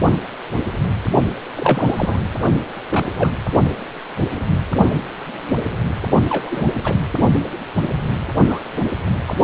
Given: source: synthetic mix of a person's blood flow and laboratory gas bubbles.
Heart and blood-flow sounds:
Doppler ultrasound of blood flow; precordium
1.56-2.22 s: bubbles
2.89-3.05 s: bubbles
3.16-3.33 s: bubbles
6.25-6.71 s: bubbles
6.75-6.80 s: bubbles
6.84-6.95 s: bubbles
8.48-8.59 s: bubbles
9.23-9.34 s: bubbles
9.41-9.44 s: bubbles
From the record:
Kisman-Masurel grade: 222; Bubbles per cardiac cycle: several, 3 to 8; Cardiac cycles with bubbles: 10 to 50%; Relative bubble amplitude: moderate (0.250 to 0.450); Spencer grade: 2 (many but less than half of the cardiac periods contain bubble signals, singularly or in groups); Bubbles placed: only in the low amplitude regions of the cardiac cycle

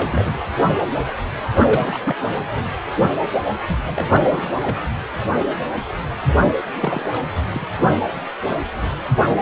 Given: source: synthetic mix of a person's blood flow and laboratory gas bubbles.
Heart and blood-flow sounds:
Doppler ultrasound of blood flow; precordium
0.00-0.35 s: bubbles
1.70-2.16 s: bubbles
3.67-3.76 s: bubbles
3.83-4.76 s: bubbles
6.77-7.05 s: bubbles
7.12-7.27 s: bubbles
7.54-7.67 s: bubbles
From the record:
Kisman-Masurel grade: 221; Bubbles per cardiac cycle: several, 3 to 8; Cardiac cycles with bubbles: 10 to 50%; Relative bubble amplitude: barely perceptible (0.100 to 0.250); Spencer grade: 2 (many but less than half of the cardiac periods contain bubble signals, singularly or in groups); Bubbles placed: anywhere in the cardiac cycle

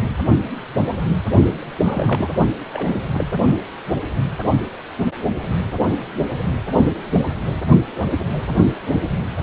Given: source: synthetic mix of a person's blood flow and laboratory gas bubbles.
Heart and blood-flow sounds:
Doppler ultrasound of blood flow; precordium
1.83-2.30 s: bubbles
2.72-3.04 s: bubbles
3.14-3.27 s: bubbles
From the record:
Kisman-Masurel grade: 221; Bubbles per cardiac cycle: several, 3 to 8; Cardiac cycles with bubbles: 10 to 50%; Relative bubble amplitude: barely perceptible (0.100 to 0.250); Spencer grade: 2 (many but less than half of the cardiac periods contain bubble signals, singularly or in groups); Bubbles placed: only in the low amplitude regions of the cardiac cycle

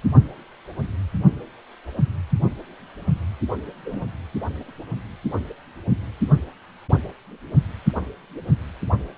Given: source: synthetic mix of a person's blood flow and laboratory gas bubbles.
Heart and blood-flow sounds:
Doppler ultrasound of blood flow; precordium
3.85-4.01 s: bubbles
From the record:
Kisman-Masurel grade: 111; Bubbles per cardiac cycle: 1 to 2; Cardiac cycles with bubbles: 1 to 10%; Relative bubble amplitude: barely perceptible (0.100 to 0.250); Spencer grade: 1 (occasional bubble signal discernible with the cardiac motion signal, with majority of cardiac periods free of bubbles); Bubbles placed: only in the low amplitude regions of the cardiac cycle

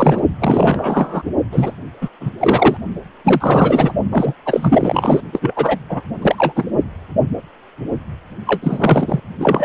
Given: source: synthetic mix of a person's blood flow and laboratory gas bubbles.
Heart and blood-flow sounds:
Doppler ultrasound of blood flow; precordium
0.00-0.22 s: bubbles
0.40-1.22 s: bubbles
1.51-1.72 s: bubbles
2.01-2.09 s: bubbles
2.20-2.31 s: bubbles
2.40-2.77 s: bubbles
3.25-3.92 s: bubbles
4.12-4.33 s: bubbles
4.46-5.21 s: bubbles
5.32-5.78 s: bubbles
5.89-6.01 s: bubbles
6.22-6.65 s: bubbles
8.46-9.21 s: bubbles
9.39-9.65 s: bubbles
From the record:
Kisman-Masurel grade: 333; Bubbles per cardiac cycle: rolling drumbeat, 9 or more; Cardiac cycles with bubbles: 50 to 99%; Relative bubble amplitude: loud (0.450 to 0.775); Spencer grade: 3 (all of the cardiac periods contain showers or single bubble signals, but not dominating or overriding the cardiac motion signals); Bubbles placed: only in the low amplitude regions of the cardiac cycle

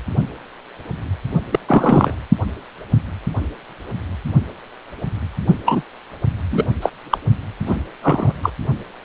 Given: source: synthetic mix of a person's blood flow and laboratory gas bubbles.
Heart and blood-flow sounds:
Doppler ultrasound of blood flow; precordium
1.52-1.59 s: bubbles
1.68-2.15 s: bubbles
5.65-5.83 s: bubbles
6.49-6.69 s: bubbles
6.81-6.89 s: bubbles
7.09-7.17 s: bubbles
7.65-7.77 s: bubbles
8.02-8.33 s: bubbles
8.42-8.49 s: bubbles
From the record:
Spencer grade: 2 (many but less than half of the cardiac periods contain bubble signals, singularly or in groups); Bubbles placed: only in the low amplitude regions of the cardiac cycle

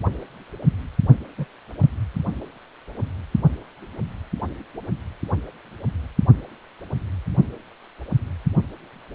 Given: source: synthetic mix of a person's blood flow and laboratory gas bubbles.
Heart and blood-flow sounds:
Doppler ultrasound of blood flow; precordium
1.38-1.46 s: bubbles
1.80-1.88 s: bubbles
From the record:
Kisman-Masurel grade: 111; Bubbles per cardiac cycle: 1 to 2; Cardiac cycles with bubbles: 1 to 10%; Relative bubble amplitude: barely perceptible (0.100 to 0.250); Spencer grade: 1 (occasional bubble signal discernible with the cardiac motion signal, with majority of cardiac periods free of bubbles); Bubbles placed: only in the low amplitude regions of the cardiac cycle

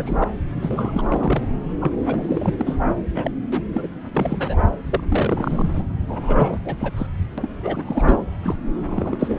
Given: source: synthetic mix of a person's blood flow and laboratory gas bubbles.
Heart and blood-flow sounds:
Doppler ultrasound of blood flow; subclavian vein
0.00-0.29 s: bubbles
0.60-1.42 s: bubbles
1.81-1.92 s: bubbles
1.98-2.54 s: bubbles
2.57-2.78 s: bubbles
3.15-3.31 s: bubbles
3.52-3.66 s: bubbles
3.73-3.87 s: bubbles
4.13-4.57 s: bubbles
4.85-5.00 s: bubbles
5.09-5.83 s: bubbles
6.07-6.58 s: bubbles
6.64-6.77 s: bubbles
6.79-6.93 s: bubbles
6.96-7.07 s: bubbles
7.38-7.51 s: bubbles
7.62-8.24 s: bubbles
8.42-8.56 s: bubbles
8.79-9.38 s: bubbles
From the record:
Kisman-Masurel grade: 342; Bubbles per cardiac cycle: rolling drumbeat, 9 or more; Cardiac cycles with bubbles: 100%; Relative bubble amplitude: moderate (0.250 to 0.450); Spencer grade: 3 (all of the cardiac periods contain showers or single bubble signals, but not dominating or overriding the cardiac motion signals); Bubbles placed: anywhere in the cardiac cycle

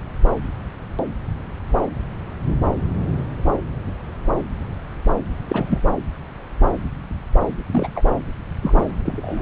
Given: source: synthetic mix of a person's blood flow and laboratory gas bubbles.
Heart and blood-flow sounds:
Doppler ultrasound of blood flow; subclavian vein
5.49-5.81 s: bubbles
7.71-7.88 s: bubbles
7.95-8.02 s: bubbles
8.62-8.84 s: bubbles
9.04-9.42 s: bubbles
From the record:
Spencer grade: 2 (many but less than half of the cardiac periods contain bubble signals, singularly or in groups); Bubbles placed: anywhere in the cardiac cycle

